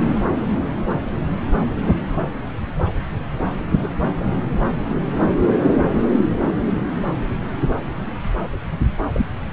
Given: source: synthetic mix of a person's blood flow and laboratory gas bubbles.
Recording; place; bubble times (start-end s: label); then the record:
Doppler ultrasound of blood flow; subclavian vein
3.81-3.94 s: bubbles
9.12-9.26 s: bubbles
From the record:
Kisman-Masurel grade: 112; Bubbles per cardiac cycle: 1 to 2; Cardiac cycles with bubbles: 1 to 10%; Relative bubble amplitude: moderate (0.250 to 0.450); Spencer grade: 1 (occasional bubble signal discernible with the cardiac motion signal, with majority of cardiac periods free of bubbles); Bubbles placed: anywhere in the cardiac cycle